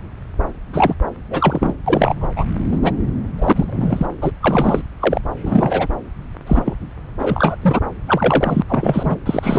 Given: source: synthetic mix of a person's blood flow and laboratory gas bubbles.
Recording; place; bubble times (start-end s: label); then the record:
Doppler ultrasound of blood flow; subclavian vein
0.72-0.95 s: bubbles
1.30-1.74 s: bubbles
1.86-2.27 s: bubbles
2.36-2.46 s: bubbles
2.71-2.91 s: bubbles
3.38-3.53 s: bubbles
3.55-4.06 s: bubbles
4.21-4.31 s: bubbles
4.42-4.83 s: bubbles
5.00-5.21 s: bubbles
5.42-5.88 s: bubbles
6.46-6.75 s: bubbles
7.19-7.55 s: bubbles
7.61-7.79 s: bubbles
8.07-8.62 s: bubbles
8.68-9.17 s: bubbles
9.26-9.59 s: bubbles
From the record:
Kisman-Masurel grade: 243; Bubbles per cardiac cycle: several, 3 to 8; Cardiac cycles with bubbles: 100%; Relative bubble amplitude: loud (0.450 to 0.775); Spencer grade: 3 (all of the cardiac periods contain showers or single bubble signals, but not dominating or overriding the cardiac motion signals); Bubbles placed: anywhere in the cardiac cycle